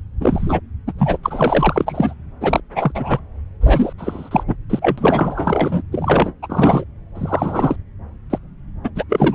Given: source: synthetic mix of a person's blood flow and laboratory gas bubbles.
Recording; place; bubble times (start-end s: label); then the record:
Doppler ultrasound of blood flow; subclavian vein
0.20-0.59 s: bubbles
0.87-0.93 s: bubbles
0.98-1.18 s: bubbles
1.23-2.14 s: bubbles
2.40-2.60 s: bubbles
2.75-2.92 s: bubbles
2.94-3.19 s: bubbles
3.61-3.93 s: bubbles
3.98-4.43 s: bubbles
4.47-4.55 s: bubbles
4.69-5.83 s: bubbles
5.92-6.33 s: bubbles
6.42-6.84 s: bubbles
7.15-7.76 s: bubbles
8.29-8.38 s: bubbles
8.84-8.90 s: bubbles
8.96-9.04 s: bubbles
9.09-9.35 s: bubbles
From the record:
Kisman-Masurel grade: 343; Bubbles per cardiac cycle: rolling drumbeat, 9 or more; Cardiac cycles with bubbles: 100%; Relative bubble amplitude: loud (0.450 to 0.775); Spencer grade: 3 (all of the cardiac periods contain showers or single bubble signals, but not dominating or overriding the cardiac motion signals); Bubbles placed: anywhere in the cardiac cycle